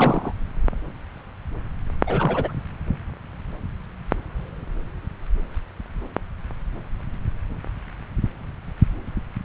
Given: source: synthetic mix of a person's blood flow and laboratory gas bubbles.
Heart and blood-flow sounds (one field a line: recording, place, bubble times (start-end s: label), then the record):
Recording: Doppler ultrasound of blood flow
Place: subclavian vein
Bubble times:
0.00-0.32 s: bubbles
2.06-2.53 s: bubbles
From the record:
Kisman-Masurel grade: 212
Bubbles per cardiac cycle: several, 3 to 8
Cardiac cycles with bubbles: 1 to 10%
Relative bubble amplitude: moderate (0.250 to 0.450)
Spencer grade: 1 (occasional bubble signal discernible with the cardiac motion signal, with majority of cardiac periods free of bubbles)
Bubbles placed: anywhere in the cardiac cycle